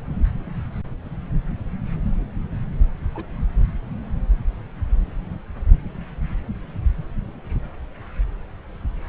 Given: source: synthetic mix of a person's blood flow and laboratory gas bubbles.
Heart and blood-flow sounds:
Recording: Doppler ultrasound of blood flow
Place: subclavian vein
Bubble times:
3.14-3.25 s: bubbles
From the record:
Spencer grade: 1 (occasional bubble signal discernible with the cardiac motion signal, with majority of cardiac periods free of bubbles)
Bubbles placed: anywhere in the cardiac cycle

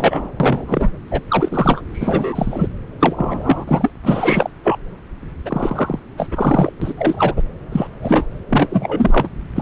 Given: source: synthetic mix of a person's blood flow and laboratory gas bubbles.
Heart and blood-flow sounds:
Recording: Doppler ultrasound of blood flow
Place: subclavian vein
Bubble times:
0.00-0.32 s: bubbles
0.40-0.92 s: bubbles
1.10-1.21 s: bubbles
1.28-1.81 s: bubbles
1.93-2.68 s: bubbles
2.99-3.92 s: bubbles
4.04-4.50 s: bubbles
4.64-4.78 s: bubbles
5.45-5.99 s: bubbles
6.17-6.71 s: bubbles
6.82-6.94 s: bubbles
6.97-7.42 s: bubbles
7.72-7.88 s: bubbles
8.01-8.26 s: bubbles
8.49-8.67 s: bubbles
8.70-9.29 s: bubbles
9.55-9.62 s: bubbles
From the record:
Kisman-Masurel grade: 343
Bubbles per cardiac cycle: rolling drumbeat, 9 or more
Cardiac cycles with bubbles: 100%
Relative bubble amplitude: loud (0.450 to 0.775)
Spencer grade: 3 (all of the cardiac periods contain showers or single bubble signals, but not dominating or overriding the cardiac motion signals)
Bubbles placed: anywhere in the cardiac cycle

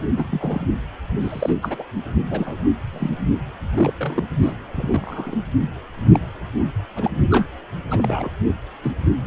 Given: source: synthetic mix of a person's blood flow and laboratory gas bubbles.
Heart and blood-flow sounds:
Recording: Doppler ultrasound of blood flow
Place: precordium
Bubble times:
0.17-0.65 s: bubbles
1.21-1.53 s: bubbles
1.62-1.83 s: bubbles
2.30-2.58 s: bubbles
2.92-3.10 s: bubbles
3.74-3.92 s: bubbles
3.99-4.24 s: bubbles
4.42-4.53 s: bubbles
4.71-4.88 s: bubbles
4.91-5.35 s: bubbles
6.12-6.20 s: bubbles
6.96-7.10 s: bubbles
7.30-7.46 s: bubbles
7.89-8.31 s: bubbles
8.83-8.92 s: bubbles
From the record:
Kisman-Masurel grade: 242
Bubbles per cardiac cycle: several, 3 to 8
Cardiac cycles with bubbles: 100%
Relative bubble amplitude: moderate (0.250 to 0.450)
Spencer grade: 3 (all of the cardiac periods contain showers or single bubble signals, but not dominating or overriding the cardiac motion signals)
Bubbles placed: anywhere in the cardiac cycle

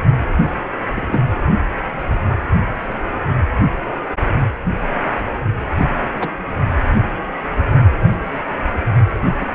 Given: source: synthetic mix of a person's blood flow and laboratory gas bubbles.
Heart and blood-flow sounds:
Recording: Doppler ultrasound of blood flow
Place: precordium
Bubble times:
0.95-1.21 s: bubbles
6.20-6.29 s: bubbles
9.40-9.46 s: bubbles
From the record:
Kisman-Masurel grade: 122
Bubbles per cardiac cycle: 1 to 2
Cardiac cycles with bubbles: 10 to 50%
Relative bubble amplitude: moderate (0.250 to 0.450)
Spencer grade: 2 (many but less than half of the cardiac periods contain bubble signals, singularly or in groups)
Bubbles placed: anywhere in the cardiac cycle

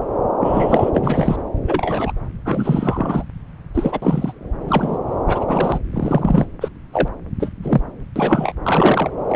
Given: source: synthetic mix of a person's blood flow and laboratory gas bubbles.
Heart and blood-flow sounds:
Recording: Doppler ultrasound of blood flow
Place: subclavian vein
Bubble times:
0.00-0.03 s: bubbles
0.40-0.91 s: bubbles
0.93-1.37 s: bubbles
1.65-2.12 s: bubbles
2.45-3.23 s: bubbles
3.74-4.32 s: bubbles
4.68-4.98 s: bubbles
5.27-5.44 s: bubbles
5.48-5.78 s: bubbles
5.93-6.46 s: bubbles
6.60-6.68 s: bubbles
6.93-7.08 s: bubbles
7.39-7.49 s: bubbles
7.62-7.81 s: bubbles
8.16-8.53 s: bubbles
8.63-9.11 s: bubbles
9.29-9.36 s: bubbles
From the record:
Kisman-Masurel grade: 242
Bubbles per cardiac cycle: several, 3 to 8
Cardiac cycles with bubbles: 100%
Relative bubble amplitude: moderate (0.250 to 0.450)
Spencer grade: 3 (all of the cardiac periods contain showers or single bubble signals, but not dominating or overriding the cardiac motion signals)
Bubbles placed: anywhere in the cardiac cycle

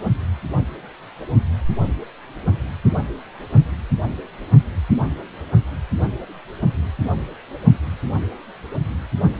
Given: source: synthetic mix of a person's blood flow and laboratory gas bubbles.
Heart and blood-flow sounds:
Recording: Doppler ultrasound of blood flow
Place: precordium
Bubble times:
no bubbles
From the record:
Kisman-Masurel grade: 000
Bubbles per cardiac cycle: 0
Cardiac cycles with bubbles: 0%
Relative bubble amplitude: no bubbles discernible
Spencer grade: 0 (complete lack of bubble signals)

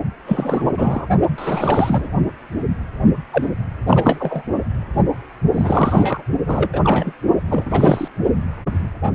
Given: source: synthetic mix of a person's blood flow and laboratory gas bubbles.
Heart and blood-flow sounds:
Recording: Doppler ultrasound of blood flow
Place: precordium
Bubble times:
0.26-0.62 s: bubbles
0.75-1.06 s: bubbles
1.38-2.08 s: bubbles
3.32-3.46 s: bubbles
3.87-4.43 s: bubbles
5.54-6.22 s: bubbles
6.46-6.69 s: bubbles
6.72-7.13 s: bubbles
7.47-8.08 s: bubbles
From the record:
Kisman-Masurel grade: 333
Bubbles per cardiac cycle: rolling drumbeat, 9 or more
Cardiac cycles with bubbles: 50 to 99%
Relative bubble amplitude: loud (0.450 to 0.775)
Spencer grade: 3 (all of the cardiac periods contain showers or single bubble signals, but not dominating or overriding the cardiac motion signals)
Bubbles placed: only in the low amplitude regions of the cardiac cycle

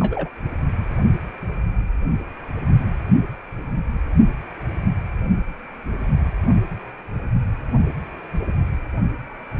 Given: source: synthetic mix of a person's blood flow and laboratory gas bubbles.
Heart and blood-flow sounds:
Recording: Doppler ultrasound of blood flow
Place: precordium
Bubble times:
0.00-0.29 s: bubbles
From the record:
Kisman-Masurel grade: 211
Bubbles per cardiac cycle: several, 3 to 8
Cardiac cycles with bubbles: 1 to 10%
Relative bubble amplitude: barely perceptible (0.100 to 0.250)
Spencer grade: 1 (occasional bubble signal discernible with the cardiac motion signal, with majority of cardiac periods free of bubbles)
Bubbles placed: only in the low amplitude regions of the cardiac cycle

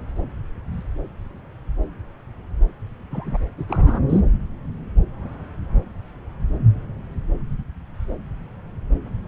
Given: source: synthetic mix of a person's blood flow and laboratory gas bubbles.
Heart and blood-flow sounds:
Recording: Doppler ultrasound of blood flow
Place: subclavian vein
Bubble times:
3.10-3.38 s: bubbles
3.58-3.65 s: bubbles
3.69-4.00 s: bubbles
4.09-4.20 s: bubbles
From the record:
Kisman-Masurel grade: 212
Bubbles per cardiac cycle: several, 3 to 8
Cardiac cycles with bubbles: 1 to 10%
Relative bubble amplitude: moderate (0.250 to 0.450)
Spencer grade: 1 (occasional bubble signal discernible with the cardiac motion signal, with majority of cardiac periods free of bubbles)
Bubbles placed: anywhere in the cardiac cycle

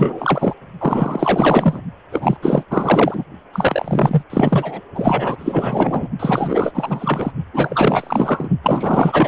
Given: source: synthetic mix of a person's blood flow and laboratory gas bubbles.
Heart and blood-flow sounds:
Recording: Doppler ultrasound of blood flow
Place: precordium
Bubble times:
0.00-0.54 s: bubbles
0.79-1.81 s: bubbles
2.11-2.37 s: bubbles
2.42-2.64 s: bubbles
2.71-3.24 s: bubbles
3.52-4.22 s: bubbles
4.29-4.80 s: bubbles
4.94-6.08 s: bubbles
6.19-7.31 s: bubbles
7.53-8.48 s: bubbles
8.63-9.28 s: bubbles
From the record:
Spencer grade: 4 (maximum detectable bubble signal sounding continuously throughout systole and diastole of every cardiac period, and overriding the amplitude of the normal cardiac signals)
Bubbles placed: only in the low amplitude regions of the cardiac cycle

